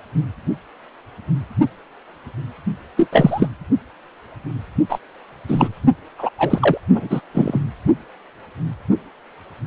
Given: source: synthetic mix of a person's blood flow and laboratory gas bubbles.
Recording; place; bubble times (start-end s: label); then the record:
Doppler ultrasound of blood flow; precordium
2.96-3.08 s: bubbles
3.12-3.47 s: bubbles
4.88-4.99 s: bubbles
5.48-5.69 s: bubbles
6.18-6.29 s: bubbles
6.38-6.77 s: bubbles
6.94-7.08 s: bubbles
7.10-7.21 s: bubbles
7.34-7.59 s: bubbles
From the record:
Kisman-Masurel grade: 223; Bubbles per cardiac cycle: several, 3 to 8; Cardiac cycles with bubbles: 10 to 50%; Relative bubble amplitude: loud (0.450 to 0.775); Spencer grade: 2 (many but less than half of the cardiac periods contain bubble signals, singularly or in groups); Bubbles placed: only in the low amplitude regions of the cardiac cycle